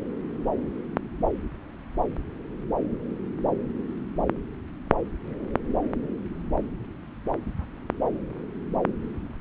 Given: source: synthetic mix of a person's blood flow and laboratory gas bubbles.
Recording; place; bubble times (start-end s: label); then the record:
Doppler ultrasound of blood flow; subclavian vein
no bubbles
From the record:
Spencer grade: 0 (complete lack of bubble signals)